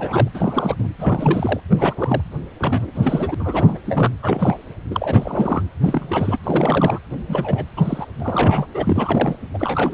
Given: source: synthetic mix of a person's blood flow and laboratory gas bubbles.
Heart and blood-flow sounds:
Doppler ultrasound of blood flow; precordium
0.00-0.29 s: bubbles
0.34-0.76 s: bubbles
0.78-0.89 s: bubbles
0.99-1.60 s: bubbles
1.70-2.22 s: bubbles
2.59-2.92 s: bubbles
2.95-3.35 s: bubbles
3.39-3.78 s: bubbles
3.85-4.08 s: bubbles
4.22-4.57 s: bubbles
4.89-5.62 s: bubbles
5.82-6.38 s: bubbles
6.43-6.98 s: bubbles
7.28-7.64 s: bubbles
7.77-8.07 s: bubbles
8.20-8.67 s: bubbles
8.74-9.36 s: bubbles
9.54-9.94 s: bubbles
From the record:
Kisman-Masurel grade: 342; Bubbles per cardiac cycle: rolling drumbeat, 9 or more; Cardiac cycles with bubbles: 100%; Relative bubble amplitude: moderate (0.250 to 0.450); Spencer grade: 3 (all of the cardiac periods contain showers or single bubble signals, but not dominating or overriding the cardiac motion signals); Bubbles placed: anywhere in the cardiac cycle

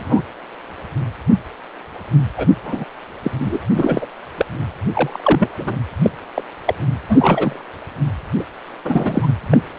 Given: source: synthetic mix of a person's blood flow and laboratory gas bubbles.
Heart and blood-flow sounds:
Doppler ultrasound of blood flow; precordium
0.00-0.22 s: bubbles
2.36-2.48 s: bubbles
2.63-2.85 s: bubbles
3.23-3.31 s: bubbles
3.40-3.58 s: bubbles
3.73-4.06 s: bubbles
4.37-4.46 s: bubbles
4.95-5.49 s: bubbles
5.57-5.77 s: bubbles
6.02-6.10 s: bubbles
6.34-6.43 s: bubbles
6.66-6.75 s: bubbles
7.09-7.62 s: bubbles
8.40-8.44 s: bubbles
8.85-9.29 s: bubbles
9.50-9.58 s: bubbles
From the record:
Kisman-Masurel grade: 233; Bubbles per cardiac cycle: several, 3 to 8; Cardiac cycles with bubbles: 50 to 99%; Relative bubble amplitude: loud (0.450 to 0.775); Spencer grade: 3 (all of the cardiac periods contain showers or single bubble signals, but not dominating or overriding the cardiac motion signals); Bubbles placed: anywhere in the cardiac cycle

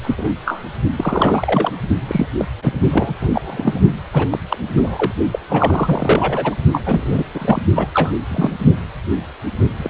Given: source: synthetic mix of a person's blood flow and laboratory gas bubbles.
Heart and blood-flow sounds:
Doppler ultrasound of blood flow; precordium
0.01-0.33 s: bubbles
0.45-0.64 s: bubbles
0.96-1.71 s: bubbles
2.08-2.27 s: bubbles
2.38-2.45 s: bubbles
2.62-2.79 s: bubbles
2.90-3.15 s: bubbles
3.21-3.81 s: bubbles
4.12-4.27 s: bubbles
4.31-4.39 s: bubbles
4.49-4.58 s: bubbles
4.77-5.12 s: bubbles
5.33-5.38 s: bubbles
5.48-6.54 s: bubbles
6.72-6.82 s: bubbles
6.86-7.24 s: bubbles
7.34-7.61 s: bubbles
7.75-7.88 s: bubbles
7.93-8.12 s: bubbles
8.29-8.52 s: bubbles
9.78-9.90 s: bubbles
From the record:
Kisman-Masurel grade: 242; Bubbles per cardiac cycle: several, 3 to 8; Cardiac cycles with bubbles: 100%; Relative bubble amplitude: moderate (0.250 to 0.450); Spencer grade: 3 (all of the cardiac periods contain showers or single bubble signals, but not dominating or overriding the cardiac motion signals); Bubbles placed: only in the low amplitude regions of the cardiac cycle

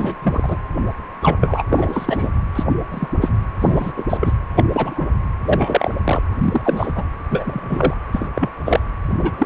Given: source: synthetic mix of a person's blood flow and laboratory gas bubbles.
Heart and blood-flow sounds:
Doppler ultrasound of blood flow; precordium
0.00-0.15 s: bubbles
0.22-0.57 s: bubbles
1.22-1.37 s: bubbles
1.41-1.62 s: bubbles
1.71-2.29 s: bubbles
2.55-2.63 s: bubbles
2.91-3.08 s: bubbles
3.21-3.32 s: bubbles
3.59-3.93 s: bubbles
3.96-4.04 s: bubbles
4.09-4.17 s: bubbles
4.21-4.33 s: bubbles
4.56-4.64 s: bubbles
4.71-5.06 s: bubbles
5.45-5.96 s: bubbles
6.04-6.22 s: bubbles
6.41-6.62 s: bubbles
6.64-6.92 s: bubbles
6.95-7.04 s: bubbles
7.30-7.94 s: bubbles
8.12-8.28 s: bubbles
8.35-8.51 s: bubbles
8.65-8.80 s: bubbles
9.19-9.46 s: bubbles
From the record:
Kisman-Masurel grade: 243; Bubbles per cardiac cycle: several, 3 to 8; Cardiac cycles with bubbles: 100%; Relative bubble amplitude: loud (0.450 to 0.775); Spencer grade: 3 (all of the cardiac periods contain showers or single bubble signals, but not dominating or overriding the cardiac motion signals); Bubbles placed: anywhere in the cardiac cycle

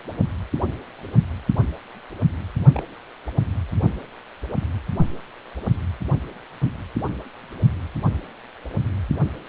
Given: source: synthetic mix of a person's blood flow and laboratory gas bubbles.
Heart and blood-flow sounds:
Doppler ultrasound of blood flow; precordium
2.73-2.83 s: bubbles
From the record:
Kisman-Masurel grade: 111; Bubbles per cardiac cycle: 1 to 2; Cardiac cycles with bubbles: 1 to 10%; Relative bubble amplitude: barely perceptible (0.100 to 0.250); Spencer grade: 1 (occasional bubble signal discernible with the cardiac motion signal, with majority of cardiac periods free of bubbles); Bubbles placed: anywhere in the cardiac cycle

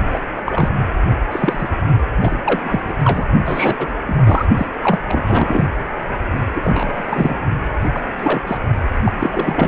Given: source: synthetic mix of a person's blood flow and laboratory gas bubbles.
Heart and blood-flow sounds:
Doppler ultrasound of blood flow; precordium
0.12-0.20 s: bubbles
0.36-0.41 s: bubbles
0.46-0.69 s: bubbles
1.31-1.69 s: bubbles
2.21-2.43 s: bubbles
2.46-2.94 s: bubbles
3.03-3.25 s: bubbles
3.46-3.88 s: bubbles
4.05-4.46 s: bubbles
4.56-4.66 s: bubbles
4.83-4.99 s: bubbles
5.07-5.65 s: bubbles
6.55-7.38 s: bubbles
7.93-8.00 s: bubbles
8.17-8.42 s: bubbles
8.47-8.57 s: bubbles
9.05-9.12 s: bubbles
9.19-9.68 s: bubbles
From the record:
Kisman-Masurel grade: 342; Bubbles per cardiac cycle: rolling drumbeat, 9 or more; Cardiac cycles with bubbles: 100%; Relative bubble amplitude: moderate (0.250 to 0.450); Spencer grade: 3 (all of the cardiac periods contain showers or single bubble signals, but not dominating or overriding the cardiac motion signals); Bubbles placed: only in the low amplitude regions of the cardiac cycle

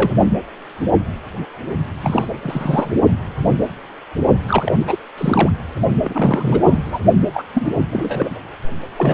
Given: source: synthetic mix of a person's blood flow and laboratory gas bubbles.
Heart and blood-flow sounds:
Doppler ultrasound of blood flow; precordium
0.00-0.15 s: bubbles
2.01-2.27 s: bubbles
2.41-2.92 s: bubbles
4.48-4.75 s: bubbles
4.79-4.98 s: bubbles
5.17-5.50 s: bubbles
6.02-6.60 s: bubbles
6.66-7.00 s: bubbles
7.33-7.43 s: bubbles
7.54-7.71 s: bubbles
7.75-7.85 s: bubbles
7.89-8.38 s: bubbles
8.96-9.14 s: bubbles
From the record:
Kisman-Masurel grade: 332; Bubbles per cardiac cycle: rolling drumbeat, 9 or more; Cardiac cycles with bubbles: 50 to 99%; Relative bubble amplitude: moderate (0.250 to 0.450); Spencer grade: 3 (all of the cardiac periods contain showers or single bubble signals, but not dominating or overriding the cardiac motion signals); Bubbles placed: only in the low amplitude regions of the cardiac cycle

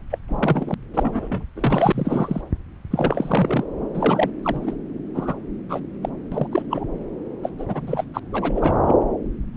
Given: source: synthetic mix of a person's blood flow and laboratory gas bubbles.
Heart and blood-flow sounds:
Doppler ultrasound of blood flow; subclavian vein
0.11-0.19 s: bubbles
0.28-0.74 s: bubbles
0.93-1.45 s: bubbles
1.56-2.42 s: bubbles
2.91-3.64 s: bubbles
3.94-4.30 s: bubbles
4.42-4.75 s: bubbles
5.14-5.34 s: bubbles
5.68-5.80 s: bubbles
6.02-6.09 s: bubbles
6.31-6.48 s: bubbles
6.51-6.62 s: bubbles
6.70-6.85 s: bubbles
7.43-7.50 s: bubbles
7.58-8.04 s: bubbles
8.13-8.20 s: bubbles
8.33-8.95 s: bubbles
9.54-9.57 s: bubbles
From the record:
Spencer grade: 3 (all of the cardiac periods contain showers or single bubble signals, but not dominating or overriding the cardiac motion signals); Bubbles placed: anywhere in the cardiac cycle

